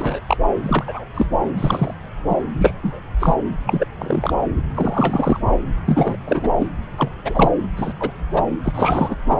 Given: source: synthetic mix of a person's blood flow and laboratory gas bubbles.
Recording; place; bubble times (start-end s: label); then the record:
Doppler ultrasound of blood flow; subclavian vein
0.00-0.21 s: bubbles
0.27-0.37 s: bubbles
0.64-1.04 s: bubbles
1.14-1.27 s: bubbles
1.58-1.94 s: bubbles
2.29-2.37 s: bubbles
2.58-2.74 s: bubbles
2.82-3.00 s: bubbles
3.20-3.35 s: bubbles
3.66-3.85 s: bubbles
3.98-4.33 s: bubbles
4.74-5.40 s: bubbles
5.84-6.17 s: bubbles
6.25-6.48 s: bubbles
6.58-6.68 s: bubbles
6.96-7.08 s: bubbles
7.24-7.49 s: bubbles
7.76-7.93 s: bubbles
8.00-8.11 s: bubbles
8.34-8.45 s: bubbles
8.63-9.16 s: bubbles
9.28-9.40 s: bubbles
From the record:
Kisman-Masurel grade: 233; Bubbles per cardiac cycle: several, 3 to 8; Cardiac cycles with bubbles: 50 to 99%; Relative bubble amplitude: loud (0.450 to 0.775); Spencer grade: 3 (all of the cardiac periods contain showers or single bubble signals, but not dominating or overriding the cardiac motion signals); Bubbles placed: anywhere in the cardiac cycle